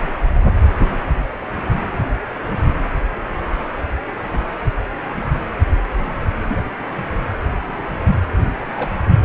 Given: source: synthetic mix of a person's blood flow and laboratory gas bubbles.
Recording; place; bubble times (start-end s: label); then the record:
Doppler ultrasound of blood flow; precordium
6.42-6.62 s: bubbles
8.76-9.13 s: bubbles
From the record:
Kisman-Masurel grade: 121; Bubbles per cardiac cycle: 1 to 2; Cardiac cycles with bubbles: 10 to 50%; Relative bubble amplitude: barely perceptible (0.100 to 0.250); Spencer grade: 2 (many but less than half of the cardiac periods contain bubble signals, singularly or in groups); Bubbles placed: anywhere in the cardiac cycle